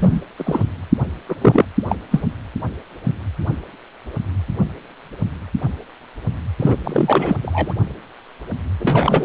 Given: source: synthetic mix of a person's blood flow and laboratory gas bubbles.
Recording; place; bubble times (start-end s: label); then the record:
Doppler ultrasound of blood flow; precordium
0.00-0.21 s: bubbles
0.38-0.64 s: bubbles
1.28-1.35 s: bubbles
1.41-1.66 s: bubbles
1.89-1.97 s: bubbles
2.11-2.22 s: bubbles
6.59-6.76 s: bubbles
6.83-7.36 s: bubbles
7.42-7.74 s: bubbles
8.79-9.25 s: bubbles
From the record:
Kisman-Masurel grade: 233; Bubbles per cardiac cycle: several, 3 to 8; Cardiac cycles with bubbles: 50 to 99%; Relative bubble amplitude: loud (0.450 to 0.775); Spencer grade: 3 (all of the cardiac periods contain showers or single bubble signals, but not dominating or overriding the cardiac motion signals); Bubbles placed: anywhere in the cardiac cycle